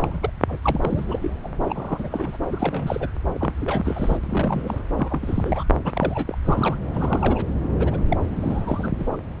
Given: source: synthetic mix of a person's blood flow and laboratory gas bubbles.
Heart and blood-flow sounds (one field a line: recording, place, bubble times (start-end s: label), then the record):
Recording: Doppler ultrasound of blood flow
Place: subclavian vein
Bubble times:
0.00-0.30 s: bubbles
0.47-0.81 s: bubbles
0.84-1.19 s: bubbles
1.21-1.31 s: bubbles
1.43-1.48 s: bubbles
1.66-2.36 s: bubbles
2.49-3.08 s: bubbles
3.34-4.18 s: bubbles
4.24-4.82 s: bubbles
4.98-5.64 s: bubbles
5.84-6.38 s: bubbles
6.45-6.77 s: bubbles
6.93-7.46 s: bubbles
7.79-7.97 s: bubbles
8.09-8.17 s: bubbles
8.21-8.91 s: bubbles
8.98-9.10 s: bubbles
9.12-9.18 s: bubbles
From the record:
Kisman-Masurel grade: 332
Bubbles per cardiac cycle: rolling drumbeat, 9 or more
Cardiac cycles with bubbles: 50 to 99%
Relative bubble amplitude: moderate (0.250 to 0.450)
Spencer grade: 3 (all of the cardiac periods contain showers or single bubble signals, but not dominating or overriding the cardiac motion signals)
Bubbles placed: anywhere in the cardiac cycle